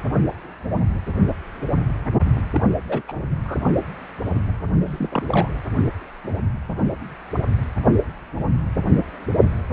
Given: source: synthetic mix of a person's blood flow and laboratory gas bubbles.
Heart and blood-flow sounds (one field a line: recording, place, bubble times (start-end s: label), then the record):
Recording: Doppler ultrasound of blood flow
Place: precordium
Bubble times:
2.54-2.60 s: bubbles
2.88-3.02 s: bubbles
3.08-3.12 s: bubbles
3.45-3.58 s: bubbles
4.85-5.48 s: bubbles
From the record:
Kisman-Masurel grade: 221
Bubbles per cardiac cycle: several, 3 to 8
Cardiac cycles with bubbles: 10 to 50%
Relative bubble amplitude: barely perceptible (0.100 to 0.250)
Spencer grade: 2 (many but less than half of the cardiac periods contain bubble signals, singularly or in groups)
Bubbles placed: only in the low amplitude regions of the cardiac cycle